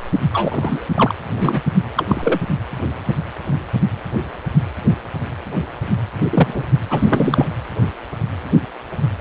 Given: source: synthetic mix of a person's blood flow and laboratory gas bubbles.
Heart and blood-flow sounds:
Doppler ultrasound of blood flow; precordium
0.33-0.86 s: bubbles
0.95-1.15 s: bubbles
1.35-1.61 s: bubbles
1.96-2.40 s: bubbles
6.29-6.63 s: bubbles
6.90-7.47 s: bubbles
From the record:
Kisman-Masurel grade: 223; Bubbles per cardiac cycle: several, 3 to 8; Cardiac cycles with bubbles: 10 to 50%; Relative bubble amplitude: loud (0.450 to 0.775); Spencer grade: 2 (many but less than half of the cardiac periods contain bubble signals, singularly or in groups); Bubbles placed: anywhere in the cardiac cycle

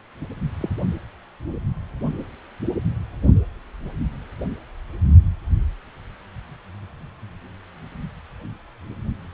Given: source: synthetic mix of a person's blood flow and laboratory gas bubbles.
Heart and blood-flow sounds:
Doppler ultrasound of blood flow; precordium
0.60-0.69 s: bubbles
From the record:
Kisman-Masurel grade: 122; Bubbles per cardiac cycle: 1 to 2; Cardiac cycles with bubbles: 10 to 50%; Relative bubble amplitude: moderate (0.250 to 0.450); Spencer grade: 2 (many but less than half of the cardiac periods contain bubble signals, singularly or in groups); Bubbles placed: only in the low amplitude regions of the cardiac cycle

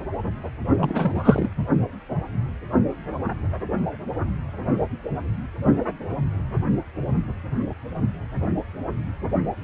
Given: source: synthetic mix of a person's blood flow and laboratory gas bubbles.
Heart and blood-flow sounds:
Doppler ultrasound of blood flow; precordium
0.79-1.49 s: bubbles
From the record:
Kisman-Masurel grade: 223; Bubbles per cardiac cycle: several, 3 to 8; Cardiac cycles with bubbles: 10 to 50%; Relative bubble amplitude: loud (0.450 to 0.775); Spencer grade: 2 (many but less than half of the cardiac periods contain bubble signals, singularly or in groups); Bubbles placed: anywhere in the cardiac cycle

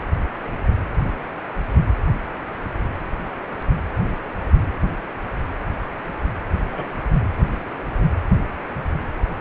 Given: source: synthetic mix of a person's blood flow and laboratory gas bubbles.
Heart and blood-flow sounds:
Doppler ultrasound of blood flow; precordium
6.69-6.99 s: bubbles
7.37-7.45 s: bubbles
From the record:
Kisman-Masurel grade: 122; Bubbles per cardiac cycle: 1 to 2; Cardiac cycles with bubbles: 10 to 50%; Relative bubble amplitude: moderate (0.250 to 0.450); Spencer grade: 2 (many but less than half of the cardiac periods contain bubble signals, singularly or in groups); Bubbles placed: anywhere in the cardiac cycle

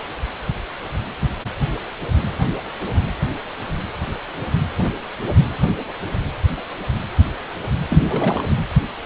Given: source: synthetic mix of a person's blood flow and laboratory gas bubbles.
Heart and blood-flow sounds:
Doppler ultrasound of blood flow; precordium
7.90-8.44 s: bubbles
From the record:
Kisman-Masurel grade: 221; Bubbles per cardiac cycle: several, 3 to 8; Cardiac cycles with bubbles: 10 to 50%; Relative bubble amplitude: barely perceptible (0.100 to 0.250); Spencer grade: 2 (many but less than half of the cardiac periods contain bubble signals, singularly or in groups); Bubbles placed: anywhere in the cardiac cycle

